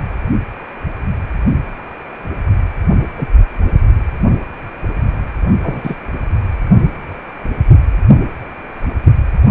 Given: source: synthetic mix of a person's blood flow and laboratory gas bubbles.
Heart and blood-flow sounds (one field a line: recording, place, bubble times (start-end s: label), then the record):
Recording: Doppler ultrasound of blood flow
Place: precordium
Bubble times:
3.17-3.28 s: bubbles
5.63-5.95 s: bubbles
From the record:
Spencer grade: 2 (many but less than half of the cardiac periods contain bubble signals, singularly or in groups)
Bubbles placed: anywhere in the cardiac cycle